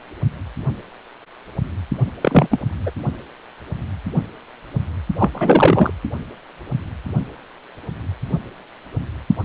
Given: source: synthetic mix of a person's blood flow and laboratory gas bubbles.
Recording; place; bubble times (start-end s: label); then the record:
Doppler ultrasound of blood flow; precordium
2.21-2.61 s: bubbles
2.86-2.91 s: bubbles
5.19-5.29 s: bubbles
5.34-5.90 s: bubbles
From the record:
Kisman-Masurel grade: 223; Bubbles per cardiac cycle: several, 3 to 8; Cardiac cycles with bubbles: 10 to 50%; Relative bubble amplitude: loud (0.450 to 0.775); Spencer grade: 2 (many but less than half of the cardiac periods contain bubble signals, singularly or in groups); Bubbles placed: only in the low amplitude regions of the cardiac cycle